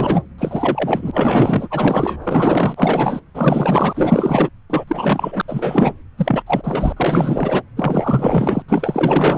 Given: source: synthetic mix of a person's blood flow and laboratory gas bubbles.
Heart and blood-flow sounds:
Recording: Doppler ultrasound of blood flow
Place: subclavian vein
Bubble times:
0.00-0.22 s: bubbles
0.38-3.20 s: bubbles
3.34-4.49 s: bubbles
4.70-4.85 s: bubbles
4.88-5.42 s: bubbles
5.48-5.92 s: bubbles
6.17-6.42 s: bubbles
6.46-6.92 s: bubbles
6.96-7.62 s: bubbles
7.77-8.62 s: bubbles
8.68-9.38 s: bubbles
From the record:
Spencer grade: 4 (maximum detectable bubble signal sounding continuously throughout systole and diastole of every cardiac period, and overriding the amplitude of the normal cardiac signals)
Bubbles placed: anywhere in the cardiac cycle

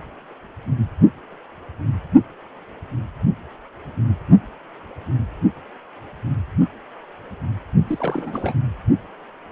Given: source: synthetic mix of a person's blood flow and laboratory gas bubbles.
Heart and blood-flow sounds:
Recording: Doppler ultrasound of blood flow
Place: precordium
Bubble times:
7.87-8.54 s: bubbles
From the record:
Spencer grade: 1 (occasional bubble signal discernible with the cardiac motion signal, with majority of cardiac periods free of bubbles)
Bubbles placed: only in the low amplitude regions of the cardiac cycle

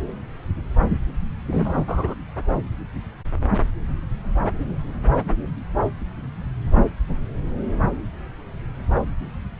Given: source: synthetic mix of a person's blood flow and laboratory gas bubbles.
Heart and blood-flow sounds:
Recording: Doppler ultrasound of blood flow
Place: subclavian vein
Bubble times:
1.51-1.83 s: bubbles
1.88-2.14 s: bubbles
From the record:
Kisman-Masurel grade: 122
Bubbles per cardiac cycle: 1 to 2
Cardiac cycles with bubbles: 10 to 50%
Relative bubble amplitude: moderate (0.250 to 0.450)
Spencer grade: 2 (many but less than half of the cardiac periods contain bubble signals, singularly or in groups)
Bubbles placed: anywhere in the cardiac cycle

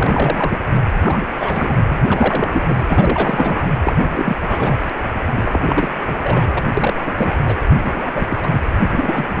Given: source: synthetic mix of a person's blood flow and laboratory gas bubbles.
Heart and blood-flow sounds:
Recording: Doppler ultrasound of blood flow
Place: precordium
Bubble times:
0.00-0.58 s: bubbles
0.91-1.20 s: bubbles
1.40-1.76 s: bubbles
1.89-2.02 s: bubbles
2.06-3.69 s: bubbles
3.84-3.92 s: bubbles
4.04-4.37 s: bubbles
4.48-4.76 s: bubbles
5.27-5.32 s: bubbles
5.34-5.60 s: bubbles
5.67-5.88 s: bubbles
6.05-6.63 s: bubbles
6.77-7.14 s: bubbles
7.17-7.59 s: bubbles
7.62-8.27 s: bubbles
8.30-8.48 s: bubbles
8.52-8.62 s: bubbles
8.87-9.40 s: bubbles
From the record:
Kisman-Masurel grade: 342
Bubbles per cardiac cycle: rolling drumbeat, 9 or more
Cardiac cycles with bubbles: 100%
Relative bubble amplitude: moderate (0.250 to 0.450)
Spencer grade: 3 (all of the cardiac periods contain showers or single bubble signals, but not dominating or overriding the cardiac motion signals)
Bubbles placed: anywhere in the cardiac cycle

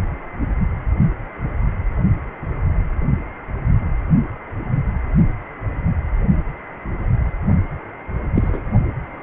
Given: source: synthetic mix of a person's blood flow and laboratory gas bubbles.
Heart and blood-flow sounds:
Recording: Doppler ultrasound of blood flow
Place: precordium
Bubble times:
8.36-8.61 s: bubbles
From the record:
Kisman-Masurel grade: 112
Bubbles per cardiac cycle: 1 to 2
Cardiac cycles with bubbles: 1 to 10%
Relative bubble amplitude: moderate (0.250 to 0.450)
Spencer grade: 1 (occasional bubble signal discernible with the cardiac motion signal, with majority of cardiac periods free of bubbles)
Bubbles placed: only in the low amplitude regions of the cardiac cycle

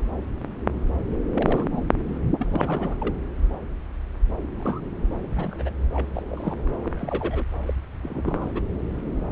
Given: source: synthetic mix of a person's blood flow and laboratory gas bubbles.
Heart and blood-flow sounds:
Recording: Doppler ultrasound of blood flow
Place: subclavian vein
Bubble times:
1.34-1.69 s: bubbles
1.72-1.89 s: bubbles
2.08-2.20 s: bubbles
2.39-3.14 s: bubbles
4.50-4.80 s: bubbles
5.19-5.71 s: bubbles
5.93-6.10 s: bubbles
6.14-6.22 s: bubbles
6.29-6.55 s: bubbles
6.83-7.45 s: bubbles
7.65-7.74 s: bubbles
8.03-8.61 s: bubbles
From the record:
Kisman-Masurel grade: 232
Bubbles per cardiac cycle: several, 3 to 8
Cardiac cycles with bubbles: 50 to 99%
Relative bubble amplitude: moderate (0.250 to 0.450)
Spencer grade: 3 (all of the cardiac periods contain showers or single bubble signals, but not dominating or overriding the cardiac motion signals)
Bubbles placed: anywhere in the cardiac cycle

